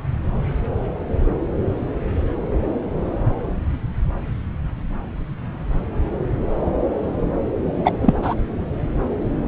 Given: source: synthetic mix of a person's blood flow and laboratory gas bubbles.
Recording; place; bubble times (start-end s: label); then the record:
Doppler ultrasound of blood flow; subclavian vein
7.84-7.93 s: bubbles
8.02-8.13 s: bubbles
8.22-8.35 s: bubbles
From the record:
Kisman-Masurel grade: 213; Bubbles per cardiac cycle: several, 3 to 8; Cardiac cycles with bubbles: 1 to 10%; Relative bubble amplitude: loud (0.450 to 0.775); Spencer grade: 1 (occasional bubble signal discernible with the cardiac motion signal, with majority of cardiac periods free of bubbles); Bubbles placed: anywhere in the cardiac cycle